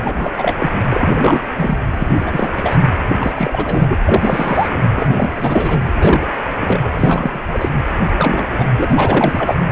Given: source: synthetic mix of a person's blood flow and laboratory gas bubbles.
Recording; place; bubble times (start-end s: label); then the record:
Doppler ultrasound of blood flow; precordium
0.04-0.30 s: bubbles
0.36-0.55 s: bubbles
0.58-0.70 s: bubbles
0.89-1.42 s: bubbles
1.55-1.78 s: bubbles
1.91-2.18 s: bubbles
2.21-2.51 s: bubbles
2.56-2.79 s: bubbles
3.08-3.17 s: bubbles
3.20-3.33 s: bubbles
3.35-3.94 s: bubbles
4.05-4.82 s: bubbles
4.96-5.29 s: bubbles
5.34-5.88 s: bubbles
5.96-6.28 s: bubbles
6.59-6.92 s: bubbles
6.96-7.41 s: bubbles
7.52-7.69 s: bubbles
7.72-7.78 s: bubbles
7.99-8.48 s: bubbles
8.52-8.68 s: bubbles
8.77-9.55 s: bubbles
From the record:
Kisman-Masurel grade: 343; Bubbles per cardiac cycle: rolling drumbeat, 9 or more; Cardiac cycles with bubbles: 100%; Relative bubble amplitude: loud (0.450 to 0.775); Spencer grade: 3 (all of the cardiac periods contain showers or single bubble signals, but not dominating or overriding the cardiac motion signals); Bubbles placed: anywhere in the cardiac cycle